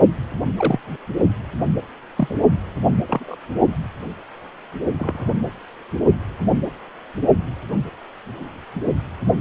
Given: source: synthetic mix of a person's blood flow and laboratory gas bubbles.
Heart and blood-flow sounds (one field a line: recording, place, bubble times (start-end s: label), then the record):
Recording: Doppler ultrasound of blood flow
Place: precordium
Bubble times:
0.57-0.80 s: bubbles
2.15-2.36 s: bubbles
3.06-3.36 s: bubbles
4.98-5.33 s: bubbles
From the record:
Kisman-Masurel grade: 122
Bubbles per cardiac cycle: 1 to 2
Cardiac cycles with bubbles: 10 to 50%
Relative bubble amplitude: moderate (0.250 to 0.450)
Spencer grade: 2 (many but less than half of the cardiac periods contain bubble signals, singularly or in groups)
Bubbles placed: only in the low amplitude regions of the cardiac cycle